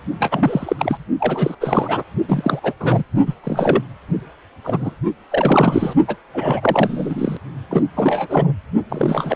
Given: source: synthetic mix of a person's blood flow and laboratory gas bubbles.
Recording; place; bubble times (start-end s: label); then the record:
Doppler ultrasound of blood flow; precordium
0.20-0.76 s: bubbles
0.78-0.98 s: bubbles
1.18-1.55 s: bubbles
1.60-2.03 s: bubbles
2.28-2.60 s: bubbles
2.62-2.74 s: bubbles
2.80-3.03 s: bubbles
3.26-3.35 s: bubbles
3.44-3.83 s: bubbles
4.64-4.95 s: bubbles
5.30-5.95 s: bubbles
6.07-6.16 s: bubbles
6.34-7.37 s: bubbles
7.71-7.87 s: bubbles
7.96-8.52 s: bubbles
8.89-9.36 s: bubbles
From the record:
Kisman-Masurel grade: 343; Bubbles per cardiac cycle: rolling drumbeat, 9 or more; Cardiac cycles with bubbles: 100%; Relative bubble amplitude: loud (0.450 to 0.775); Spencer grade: 3 (all of the cardiac periods contain showers or single bubble signals, but not dominating or overriding the cardiac motion signals); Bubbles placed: only in the low amplitude regions of the cardiac cycle